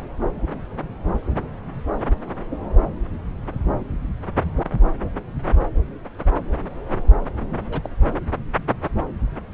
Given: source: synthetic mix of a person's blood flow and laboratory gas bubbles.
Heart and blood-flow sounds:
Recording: Doppler ultrasound of blood flow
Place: subclavian vein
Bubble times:
7.68-7.90 s: bubbles
From the record:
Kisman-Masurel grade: 111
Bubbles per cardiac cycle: 1 to 2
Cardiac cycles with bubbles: 1 to 10%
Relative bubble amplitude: barely perceptible (0.100 to 0.250)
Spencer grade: 1 (occasional bubble signal discernible with the cardiac motion signal, with majority of cardiac periods free of bubbles)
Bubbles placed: anywhere in the cardiac cycle

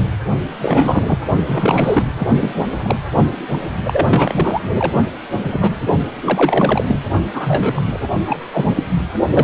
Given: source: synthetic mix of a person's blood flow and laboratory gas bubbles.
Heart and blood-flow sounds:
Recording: Doppler ultrasound of blood flow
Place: precordium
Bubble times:
0.59-1.19 s: bubbles
1.46-2.03 s: bubbles
2.19-2.27 s: bubbles
2.41-2.67 s: bubbles
2.83-2.96 s: bubbles
3.83-4.60 s: bubbles
4.79-4.92 s: bubbles
5.32-5.73 s: bubbles
6.21-6.84 s: bubbles
6.88-7.00 s: bubbles
7.33-7.98 s: bubbles
8.25-8.39 s: bubbles
8.52-8.65 s: bubbles
8.75-8.83 s: bubbles
9.30-9.44 s: bubbles
From the record:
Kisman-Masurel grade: 242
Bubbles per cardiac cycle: several, 3 to 8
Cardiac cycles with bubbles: 100%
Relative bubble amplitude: moderate (0.250 to 0.450)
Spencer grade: 3 (all of the cardiac periods contain showers or single bubble signals, but not dominating or overriding the cardiac motion signals)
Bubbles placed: only in the low amplitude regions of the cardiac cycle

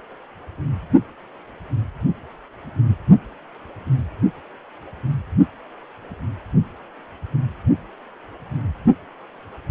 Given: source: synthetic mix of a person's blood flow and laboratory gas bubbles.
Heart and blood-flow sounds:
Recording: Doppler ultrasound of blood flow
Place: precordium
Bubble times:
no bubbles
From the record:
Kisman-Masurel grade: 000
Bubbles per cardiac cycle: 0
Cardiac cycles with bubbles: 0%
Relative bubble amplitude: no bubbles discernible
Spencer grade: 0 (complete lack of bubble signals)

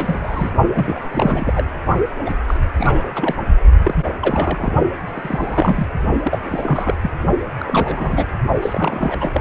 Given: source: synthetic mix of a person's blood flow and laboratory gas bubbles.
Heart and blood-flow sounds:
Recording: Doppler ultrasound of blood flow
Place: precordium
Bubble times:
0.00-0.51 s: bubbles
0.74-1.01 s: bubbles
1.10-1.69 s: bubbles
2.25-2.33 s: bubbles
2.48-2.58 s: bubbles
2.77-3.12 s: bubbles
3.15-3.35 s: bubbles
3.82-4.06 s: bubbles
4.21-4.71 s: bubbles
5.08-5.88 s: bubbles
6.22-6.39 s: bubbles
6.45-6.94 s: bubbles
7.02-7.10 s: bubbles
7.61-8.25 s: bubbles
8.62-9.18 s: bubbles
9.21-9.41 s: bubbles
From the record:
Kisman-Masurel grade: 342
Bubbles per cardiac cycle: rolling drumbeat, 9 or more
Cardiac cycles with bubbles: 100%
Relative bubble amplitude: moderate (0.250 to 0.450)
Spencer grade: 3 (all of the cardiac periods contain showers or single bubble signals, but not dominating or overriding the cardiac motion signals)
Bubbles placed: only in the low amplitude regions of the cardiac cycle

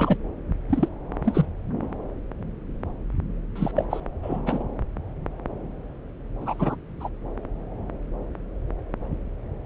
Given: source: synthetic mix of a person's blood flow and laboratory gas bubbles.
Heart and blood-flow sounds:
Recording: Doppler ultrasound of blood flow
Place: subclavian vein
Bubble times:
0.00-0.17 s: bubbles
0.69-0.89 s: bubbles
1.24-1.46 s: bubbles
1.81-1.86 s: bubbles
3.55-3.72 s: bubbles
3.76-3.85 s: bubbles
3.90-4.00 s: bubbles
4.22-4.41 s: bubbles
4.46-4.63 s: bubbles
6.41-6.75 s: bubbles
7.00-7.09 s: bubbles
From the record:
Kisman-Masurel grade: 222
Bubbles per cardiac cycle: several, 3 to 8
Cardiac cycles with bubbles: 10 to 50%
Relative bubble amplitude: moderate (0.250 to 0.450)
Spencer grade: 2 (many but less than half of the cardiac periods contain bubble signals, singularly or in groups)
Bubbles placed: anywhere in the cardiac cycle

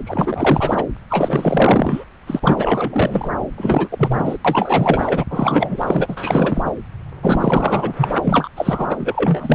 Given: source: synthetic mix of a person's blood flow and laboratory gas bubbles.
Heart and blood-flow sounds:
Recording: Doppler ultrasound of blood flow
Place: subclavian vein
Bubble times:
0.06-0.85 s: bubbles
1.10-2.04 s: bubbles
2.27-3.31 s: bubbles
3.57-3.88 s: bubbles
3.91-4.38 s: bubbles
4.44-5.24 s: bubbles
5.30-6.62 s: bubbles
6.65-6.75 s: bubbles
7.22-7.94 s: bubbles
7.96-8.48 s: bubbles
8.56-9.55 s: bubbles
From the record:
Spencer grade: 4 (maximum detectable bubble signal sounding continuously throughout systole and diastole of every cardiac period, and overriding the amplitude of the normal cardiac signals)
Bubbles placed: anywhere in the cardiac cycle

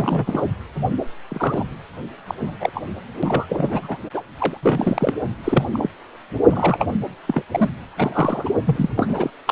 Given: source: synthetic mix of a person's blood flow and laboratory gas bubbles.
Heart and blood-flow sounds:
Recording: Doppler ultrasound of blood flow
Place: precordium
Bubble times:
0.00-0.42 s: bubbles
1.28-1.65 s: bubbles
2.27-2.34 s: bubbles
2.39-2.57 s: bubbles
2.60-2.70 s: bubbles
2.74-2.83 s: bubbles
3.22-3.97 s: bubbles
4.13-4.22 s: bubbles
4.39-4.57 s: bubbles
4.62-5.14 s: bubbles
5.44-5.64 s: bubbles
5.72-5.89 s: bubbles
6.44-6.87 s: bubbles
7.27-7.42 s: bubbles
7.51-7.69 s: bubbles
7.97-8.50 s: bubbles
8.66-8.90 s: bubbles
8.96-9.30 s: bubbles
9.47-9.52 s: bubbles
From the record:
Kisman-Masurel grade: 342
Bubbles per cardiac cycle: rolling drumbeat, 9 or more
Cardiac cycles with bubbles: 100%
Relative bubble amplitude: moderate (0.250 to 0.450)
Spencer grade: 3 (all of the cardiac periods contain showers or single bubble signals, but not dominating or overriding the cardiac motion signals)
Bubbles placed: anywhere in the cardiac cycle

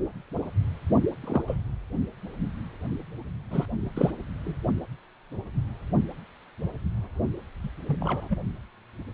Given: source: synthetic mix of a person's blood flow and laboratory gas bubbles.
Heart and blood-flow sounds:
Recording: Doppler ultrasound of blood flow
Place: precordium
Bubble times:
1.22-1.43 s: bubbles
1.47-1.57 s: bubbles
3.51-3.66 s: bubbles
3.80-4.11 s: bubbles
4.44-4.55 s: bubbles
7.63-7.68 s: bubbles
7.88-7.96 s: bubbles
8.01-8.37 s: bubbles
From the record:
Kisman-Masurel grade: 221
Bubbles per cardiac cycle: several, 3 to 8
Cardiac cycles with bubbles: 10 to 50%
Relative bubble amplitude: barely perceptible (0.100 to 0.250)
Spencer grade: 2 (many but less than half of the cardiac periods contain bubble signals, singularly or in groups)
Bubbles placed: only in the low amplitude regions of the cardiac cycle

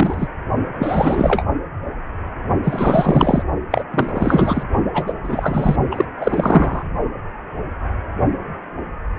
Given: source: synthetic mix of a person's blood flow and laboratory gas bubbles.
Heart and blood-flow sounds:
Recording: Doppler ultrasound of blood flow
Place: precordium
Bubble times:
0.00-0.27 s: bubbles
0.78-1.43 s: bubbles
2.63-3.42 s: bubbles
3.71-3.84 s: bubbles
3.94-4.63 s: bubbles
4.94-5.13 s: bubbles
5.23-5.76 s: bubbles
5.91-6.04 s: bubbles
6.21-6.84 s: bubbles
From the record:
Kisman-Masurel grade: 333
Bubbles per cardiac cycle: rolling drumbeat, 9 or more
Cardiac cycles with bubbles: 50 to 99%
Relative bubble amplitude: loud (0.450 to 0.775)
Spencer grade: 3 (all of the cardiac periods contain showers or single bubble signals, but not dominating or overriding the cardiac motion signals)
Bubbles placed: only in the low amplitude regions of the cardiac cycle

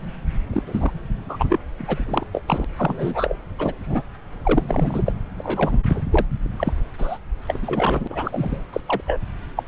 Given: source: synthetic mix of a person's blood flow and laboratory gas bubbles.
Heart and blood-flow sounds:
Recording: Doppler ultrasound of blood flow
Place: subclavian vein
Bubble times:
0.53-0.62 s: bubbles
0.67-0.91 s: bubbles
1.29-1.58 s: bubbles
1.78-2.27 s: bubbles
2.33-2.41 s: bubbles
2.48-2.65 s: bubbles
2.76-3.35 s: bubbles
3.58-4.02 s: bubbles
4.44-5.12 s: bubbles
5.38-5.76 s: bubbles
5.88-6.01 s: bubbles
6.11-6.25 s: bubbles
6.56-6.72 s: bubbles
6.98-7.18 s: bubbles
7.47-8.08 s: bubbles
8.10-8.64 s: bubbles
8.72-8.80 s: bubbles
8.88-9.01 s: bubbles
9.07-9.19 s: bubbles
9.56-9.63 s: bubbles
From the record:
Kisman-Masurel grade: 242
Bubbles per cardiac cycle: several, 3 to 8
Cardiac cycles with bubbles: 100%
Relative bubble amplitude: moderate (0.250 to 0.450)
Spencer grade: 3 (all of the cardiac periods contain showers or single bubble signals, but not dominating or overriding the cardiac motion signals)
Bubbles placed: anywhere in the cardiac cycle

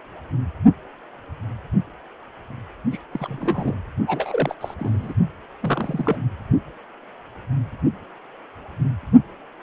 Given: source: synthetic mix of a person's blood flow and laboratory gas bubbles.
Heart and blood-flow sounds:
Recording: Doppler ultrasound of blood flow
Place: precordium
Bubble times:
2.92-2.98 s: bubbles
3.11-3.74 s: bubbles
4.07-4.55 s: bubbles
4.61-4.75 s: bubbles
4.79-5.13 s: bubbles
5.61-6.17 s: bubbles
From the record:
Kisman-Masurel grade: 221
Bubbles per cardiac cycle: several, 3 to 8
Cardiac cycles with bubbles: 10 to 50%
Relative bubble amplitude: barely perceptible (0.100 to 0.250)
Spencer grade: 2 (many but less than half of the cardiac periods contain bubble signals, singularly or in groups)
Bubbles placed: only in the low amplitude regions of the cardiac cycle

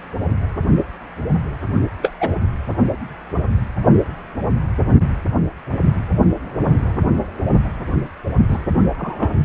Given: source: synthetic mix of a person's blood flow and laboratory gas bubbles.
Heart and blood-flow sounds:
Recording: Doppler ultrasound of blood flow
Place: precordium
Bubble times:
2.02-2.12 s: bubbles
2.21-2.33 s: bubbles
8.48-8.58 s: bubbles
8.97-9.30 s: bubbles
From the record:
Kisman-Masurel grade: 123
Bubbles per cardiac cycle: 1 to 2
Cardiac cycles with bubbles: 10 to 50%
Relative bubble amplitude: loud (0.450 to 0.775)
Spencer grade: 2 (many but less than half of the cardiac periods contain bubble signals, singularly or in groups)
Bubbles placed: only in the low amplitude regions of the cardiac cycle

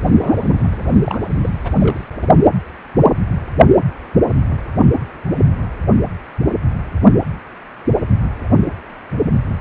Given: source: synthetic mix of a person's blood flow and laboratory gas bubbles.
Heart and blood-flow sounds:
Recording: Doppler ultrasound of blood flow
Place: precordium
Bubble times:
0.58-0.69 s: bubbles
1.04-1.20 s: bubbles
1.41-1.49 s: bubbles
1.64-1.70 s: bubbles
1.80-1.99 s: bubbles
2.21-2.28 s: bubbles
From the record:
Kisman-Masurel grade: 212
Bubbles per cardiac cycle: several, 3 to 8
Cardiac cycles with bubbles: 1 to 10%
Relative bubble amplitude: moderate (0.250 to 0.450)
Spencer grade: 1 (occasional bubble signal discernible with the cardiac motion signal, with majority of cardiac periods free of bubbles)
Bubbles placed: anywhere in the cardiac cycle

